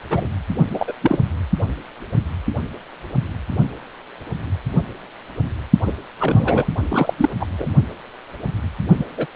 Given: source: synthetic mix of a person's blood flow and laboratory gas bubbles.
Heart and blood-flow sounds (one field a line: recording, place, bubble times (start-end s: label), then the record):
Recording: Doppler ultrasound of blood flow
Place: precordium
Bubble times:
0.10-0.27 s: bubbles
0.70-0.94 s: bubbles
1.02-1.19 s: bubbles
5.85-5.92 s: bubbles
6.19-6.70 s: bubbles
6.89-7.13 s: bubbles
7.16-7.29 s: bubbles
7.40-7.46 s: bubbles
7.58-7.67 s: bubbles
8.97-9.05 s: bubbles
9.17-9.26 s: bubbles
From the record:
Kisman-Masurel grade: 222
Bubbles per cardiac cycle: several, 3 to 8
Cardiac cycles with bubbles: 10 to 50%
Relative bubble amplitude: moderate (0.250 to 0.450)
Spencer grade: 2 (many but less than half of the cardiac periods contain bubble signals, singularly or in groups)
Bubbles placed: only in the low amplitude regions of the cardiac cycle